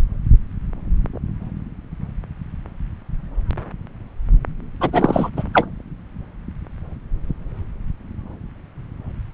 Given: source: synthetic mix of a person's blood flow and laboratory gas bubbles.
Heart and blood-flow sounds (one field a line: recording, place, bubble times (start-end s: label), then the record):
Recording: Doppler ultrasound of blood flow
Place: subclavian vein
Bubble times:
4.81-5.29 s: bubbles
5.36-5.43 s: bubbles
5.53-5.67 s: bubbles
From the record:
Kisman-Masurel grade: 223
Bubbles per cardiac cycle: several, 3 to 8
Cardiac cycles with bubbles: 10 to 50%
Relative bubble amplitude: loud (0.450 to 0.775)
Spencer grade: 2 (many but less than half of the cardiac periods contain bubble signals, singularly or in groups)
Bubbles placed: anywhere in the cardiac cycle